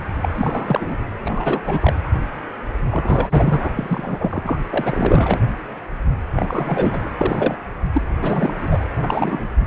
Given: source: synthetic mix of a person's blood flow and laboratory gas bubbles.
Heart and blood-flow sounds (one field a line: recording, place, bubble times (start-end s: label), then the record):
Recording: Doppler ultrasound of blood flow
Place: precordium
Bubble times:
0.00-0.04 s: bubbles
0.22-0.29 s: bubbles
0.34-0.97 s: bubbles
1.24-1.94 s: bubbles
2.90-3.69 s: bubbles
3.76-4.59 s: bubbles
4.70-5.40 s: bubbles
6.35-7.02 s: bubbles
7.18-7.57 s: bubbles
7.94-8.02 s: bubbles
8.20-8.85 s: bubbles
9.02-9.49 s: bubbles
From the record:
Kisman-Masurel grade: 332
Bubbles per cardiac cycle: rolling drumbeat, 9 or more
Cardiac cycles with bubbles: 50 to 99%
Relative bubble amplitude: moderate (0.250 to 0.450)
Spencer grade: 3 (all of the cardiac periods contain showers or single bubble signals, but not dominating or overriding the cardiac motion signals)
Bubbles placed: anywhere in the cardiac cycle